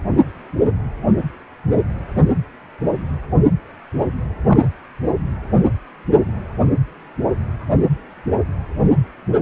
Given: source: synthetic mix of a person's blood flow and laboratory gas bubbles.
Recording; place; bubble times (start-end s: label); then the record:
Doppler ultrasound of blood flow; precordium
4.48-4.68 s: bubbles
From the record:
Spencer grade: 2 (many but less than half of the cardiac periods contain bubble signals, singularly or in groups); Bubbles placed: anywhere in the cardiac cycle